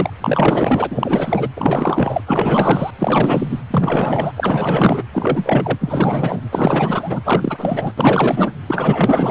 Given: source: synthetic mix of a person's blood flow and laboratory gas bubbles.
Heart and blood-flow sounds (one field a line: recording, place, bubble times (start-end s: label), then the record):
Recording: Doppler ultrasound of blood flow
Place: precordium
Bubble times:
0.00-0.10 s: bubbles
0.21-1.49 s: bubbles
1.56-2.21 s: bubbles
2.26-2.90 s: bubbles
2.99-3.59 s: bubbles
3.71-4.32 s: bubbles
4.36-5.02 s: bubbles
5.12-6.41 s: bubbles
6.50-7.21 s: bubbles
7.25-7.93 s: bubbles
7.97-8.52 s: bubbles
8.66-9.31 s: bubbles
From the record:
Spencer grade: 4 (maximum detectable bubble signal sounding continuously throughout systole and diastole of every cardiac period, and overriding the amplitude of the normal cardiac signals)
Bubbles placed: anywhere in the cardiac cycle